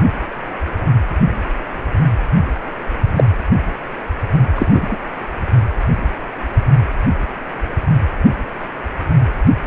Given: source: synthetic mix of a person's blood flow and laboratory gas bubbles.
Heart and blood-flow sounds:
Doppler ultrasound of blood flow; precordium
3.16-3.24 s: bubbles
4.55-4.97 s: bubbles
From the record:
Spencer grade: 2 (many but less than half of the cardiac periods contain bubble signals, singularly or in groups); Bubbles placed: anywhere in the cardiac cycle

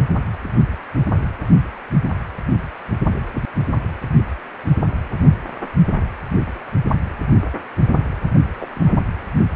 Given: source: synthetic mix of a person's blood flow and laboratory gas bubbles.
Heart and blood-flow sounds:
Doppler ultrasound of blood flow; precordium
8.60-8.69 s: bubbles
8.75-9.02 s: bubbles
From the record:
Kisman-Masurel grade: 121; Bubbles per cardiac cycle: 1 to 2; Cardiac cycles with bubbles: 10 to 50%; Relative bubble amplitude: barely perceptible (0.100 to 0.250); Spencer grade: 2 (many but less than half of the cardiac periods contain bubble signals, singularly or in groups); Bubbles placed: anywhere in the cardiac cycle

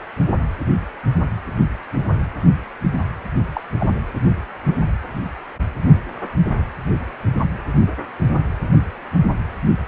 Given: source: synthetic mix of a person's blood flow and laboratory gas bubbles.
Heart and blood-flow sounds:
Doppler ultrasound of blood flow; precordium
3.54-3.61 s: bubbles
3.80-3.90 s: bubbles
From the record:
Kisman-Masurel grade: 112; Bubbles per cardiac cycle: 1 to 2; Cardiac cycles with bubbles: 1 to 10%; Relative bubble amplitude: moderate (0.250 to 0.450); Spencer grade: 1 (occasional bubble signal discernible with the cardiac motion signal, with majority of cardiac periods free of bubbles); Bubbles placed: anywhere in the cardiac cycle

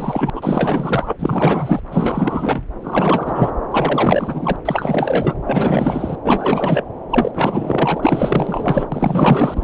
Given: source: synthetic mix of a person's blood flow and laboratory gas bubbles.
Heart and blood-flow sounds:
Doppler ultrasound of blood flow; subclavian vein
0.00-0.30 s: bubbles
0.33-1.13 s: bubbles
1.19-1.81 s: bubbles
1.90-2.62 s: bubbles
2.81-3.52 s: bubbles
3.71-4.56 s: bubbles
4.65-5.34 s: bubbles
5.44-6.16 s: bubbles
6.25-6.84 s: bubbles
7.10-7.32 s: bubbles
7.35-8.88 s: bubbles
8.92-9.64 s: bubbles
From the record:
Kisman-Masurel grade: 444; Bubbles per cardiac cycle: continuous sound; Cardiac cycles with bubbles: 100%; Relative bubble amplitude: maximal (0.775 to 0.999); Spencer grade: 4 (maximum detectable bubble signal sounding continuously throughout systole and diastole of every cardiac period, and overriding the amplitude of the normal cardiac signals); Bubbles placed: anywhere in the cardiac cycle

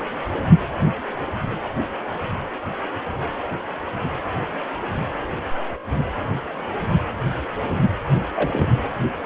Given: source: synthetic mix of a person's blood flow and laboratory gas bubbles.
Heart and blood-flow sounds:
Doppler ultrasound of blood flow; precordium
8.35-8.67 s: bubbles
From the record:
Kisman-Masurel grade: 112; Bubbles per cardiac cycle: 1 to 2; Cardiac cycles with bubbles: 1 to 10%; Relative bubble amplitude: moderate (0.250 to 0.450); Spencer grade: 1 (occasional bubble signal discernible with the cardiac motion signal, with majority of cardiac periods free of bubbles); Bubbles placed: anywhere in the cardiac cycle

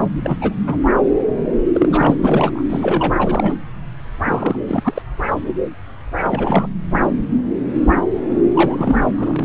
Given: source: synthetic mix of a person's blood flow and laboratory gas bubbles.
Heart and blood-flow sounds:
Doppler ultrasound of blood flow; subclavian vein
0.23-0.36 s: bubbles
0.40-0.53 s: bubbles
0.66-0.78 s: bubbles
1.72-2.16 s: bubbles
2.22-2.63 s: bubbles
2.70-3.14 s: bubbles
3.19-3.54 s: bubbles
4.25-4.61 s: bubbles
4.66-5.02 s: bubbles
6.21-6.69 s: bubbles
8.54-9.07 s: bubbles
9.17-9.45 s: bubbles
From the record:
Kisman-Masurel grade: 232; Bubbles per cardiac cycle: several, 3 to 8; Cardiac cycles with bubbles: 50 to 99%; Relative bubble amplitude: moderate (0.250 to 0.450); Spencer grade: 3 (all of the cardiac periods contain showers or single bubble signals, but not dominating or overriding the cardiac motion signals); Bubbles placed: anywhere in the cardiac cycle

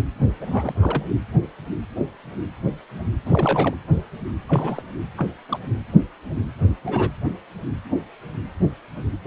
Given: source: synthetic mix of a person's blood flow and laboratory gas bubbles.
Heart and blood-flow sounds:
Doppler ultrasound of blood flow; precordium
0.00-0.02 s: bubbles
0.41-1.03 s: bubbles
3.25-3.75 s: bubbles
4.49-4.81 s: bubbles
5.17-5.28 s: bubbles
5.48-5.58 s: bubbles
6.82-7.11 s: bubbles
9.24-9.27 s: bubbles
From the record:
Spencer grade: 2 (many but less than half of the cardiac periods contain bubble signals, singularly or in groups); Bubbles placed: anywhere in the cardiac cycle

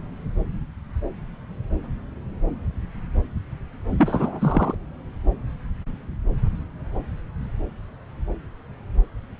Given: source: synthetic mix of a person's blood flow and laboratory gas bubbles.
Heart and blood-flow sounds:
Doppler ultrasound of blood flow; subclavian vein
3.99-4.75 s: bubbles
From the record:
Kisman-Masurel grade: 212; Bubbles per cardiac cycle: several, 3 to 8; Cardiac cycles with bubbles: 1 to 10%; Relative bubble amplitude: moderate (0.250 to 0.450); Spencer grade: 1 (occasional bubble signal discernible with the cardiac motion signal, with majority of cardiac periods free of bubbles); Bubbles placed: anywhere in the cardiac cycle

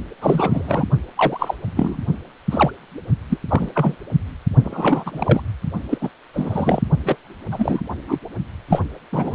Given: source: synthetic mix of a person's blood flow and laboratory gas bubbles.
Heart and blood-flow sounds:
Doppler ultrasound of blood flow; precordium
0.21-0.85 s: bubbles
1.15-1.54 s: bubbles
1.76-1.97 s: bubbles
2.51-2.71 s: bubbles
3.30-3.37 s: bubbles
3.48-3.69 s: bubbles
3.74-3.95 s: bubbles
4.63-5.41 s: bubbles
5.91-5.98 s: bubbles
6.01-6.10 s: bubbles
6.33-6.82 s: bubbles
7.05-7.17 s: bubbles
7.51-7.81 s: bubbles
8.07-8.19 s: bubbles
8.68-8.82 s: bubbles
9.12-9.35 s: bubbles
From the record:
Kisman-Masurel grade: 243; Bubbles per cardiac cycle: several, 3 to 8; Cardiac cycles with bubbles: 100%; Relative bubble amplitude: loud (0.450 to 0.775); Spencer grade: 3 (all of the cardiac periods contain showers or single bubble signals, but not dominating or overriding the cardiac motion signals); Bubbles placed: only in the low amplitude regions of the cardiac cycle

